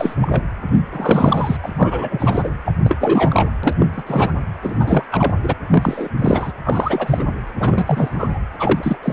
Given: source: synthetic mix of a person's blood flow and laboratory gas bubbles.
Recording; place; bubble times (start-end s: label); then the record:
Doppler ultrasound of blood flow; precordium
0.00-0.16 s: bubbles
0.20-0.43 s: bubbles
0.71-0.81 s: bubbles
0.92-1.57 s: bubbles
1.62-2.49 s: bubbles
2.65-2.75 s: bubbles
2.85-3.49 s: bubbles
3.63-3.74 s: bubbles
3.79-3.88 s: bubbles
3.96-4.04 s: bubbles
4.07-4.50 s: bubbles
4.62-5.05 s: bubbles
5.11-5.33 s: bubbles
5.42-5.54 s: bubbles
5.71-6.08 s: bubbles
6.17-6.52 s: bubbles
6.64-7.26 s: bubbles
7.59-8.41 s: bubbles
8.59-8.97 s: bubbles
9.02-9.13 s: bubbles
From the record:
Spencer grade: 3 (all of the cardiac periods contain showers or single bubble signals, but not dominating or overriding the cardiac motion signals); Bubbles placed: anywhere in the cardiac cycle